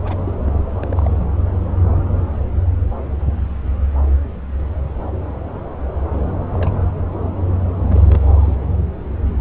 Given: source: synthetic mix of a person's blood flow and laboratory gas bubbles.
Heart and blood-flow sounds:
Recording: Doppler ultrasound of blood flow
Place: subclavian vein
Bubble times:
0.04-0.16 s: bubbles
0.24-0.33 s: bubbles
0.42-0.67 s: bubbles
0.82-0.86 s: bubbles
0.90-1.25 s: bubbles
6.12-6.30 s: bubbles
6.54-6.81 s: bubbles
7.80-8.56 s: bubbles
From the record:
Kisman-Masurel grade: 221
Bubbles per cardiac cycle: several, 3 to 8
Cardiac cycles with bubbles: 10 to 50%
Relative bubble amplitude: barely perceptible (0.100 to 0.250)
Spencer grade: 2 (many but less than half of the cardiac periods contain bubble signals, singularly or in groups)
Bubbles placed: anywhere in the cardiac cycle

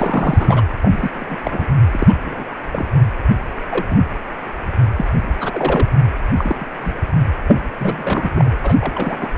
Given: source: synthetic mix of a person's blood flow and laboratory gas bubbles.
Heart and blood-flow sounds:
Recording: Doppler ultrasound of blood flow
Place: precordium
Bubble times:
0.00-0.63 s: bubbles
0.81-1.38 s: bubbles
1.43-1.66 s: bubbles
1.93-2.21 s: bubbles
2.25-2.44 s: bubbles
2.71-2.86 s: bubbles
3.69-3.85 s: bubbles
3.90-3.99 s: bubbles
4.97-5.06 s: bubbles
5.40-5.89 s: bubbles
6.37-6.66 s: bubbles
6.81-6.92 s: bubbles
7.48-7.63 s: bubbles
7.79-8.55 s: bubbles
8.62-8.77 s: bubbles
8.80-9.30 s: bubbles
From the record:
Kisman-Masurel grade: 242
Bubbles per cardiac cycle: several, 3 to 8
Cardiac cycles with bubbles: 100%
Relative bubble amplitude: moderate (0.250 to 0.450)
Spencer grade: 3 (all of the cardiac periods contain showers or single bubble signals, but not dominating or overriding the cardiac motion signals)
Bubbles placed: anywhere in the cardiac cycle

